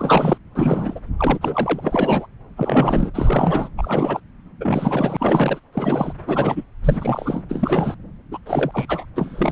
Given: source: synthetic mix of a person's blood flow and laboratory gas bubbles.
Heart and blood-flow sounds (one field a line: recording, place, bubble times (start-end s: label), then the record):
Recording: Doppler ultrasound of blood flow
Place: subclavian vein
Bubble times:
0.00-0.38 s: bubbles
0.55-1.00 s: bubbles
1.19-2.27 s: bubbles
2.57-3.11 s: bubbles
3.14-3.69 s: bubbles
3.77-4.21 s: bubbles
4.60-5.60 s: bubbles
5.73-6.13 s: bubbles
6.27-6.63 s: bubbles
6.84-7.44 s: bubbles
7.49-7.95 s: bubbles
8.31-8.38 s: bubbles
8.46-9.05 s: bubbles
9.15-9.52 s: bubbles
From the record:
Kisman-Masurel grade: 343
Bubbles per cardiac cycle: rolling drumbeat, 9 or more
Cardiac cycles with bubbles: 100%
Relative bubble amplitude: loud (0.450 to 0.775)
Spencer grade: 3 (all of the cardiac periods contain showers or single bubble signals, but not dominating or overriding the cardiac motion signals)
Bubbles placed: anywhere in the cardiac cycle